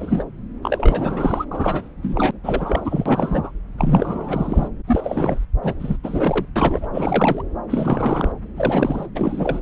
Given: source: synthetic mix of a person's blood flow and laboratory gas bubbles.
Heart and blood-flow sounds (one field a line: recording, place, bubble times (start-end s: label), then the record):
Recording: Doppler ultrasound of blood flow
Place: subclavian vein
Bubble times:
0.00-0.24 s: bubbles
0.63-1.45 s: bubbles
1.51-1.88 s: bubbles
2.02-2.31 s: bubbles
2.44-3.51 s: bubbles
3.78-4.68 s: bubbles
4.87-5.45 s: bubbles
5.62-5.74 s: bubbles
5.79-5.96 s: bubbles
6.03-6.46 s: bubbles
6.55-6.87 s: bubbles
6.93-7.42 s: bubbles
7.70-8.32 s: bubbles
8.56-9.07 s: bubbles
9.15-9.60 s: bubbles
From the record:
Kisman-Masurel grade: 342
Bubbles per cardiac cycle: rolling drumbeat, 9 or more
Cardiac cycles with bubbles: 100%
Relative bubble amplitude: moderate (0.250 to 0.450)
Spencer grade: 3 (all of the cardiac periods contain showers or single bubble signals, but not dominating or overriding the cardiac motion signals)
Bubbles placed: anywhere in the cardiac cycle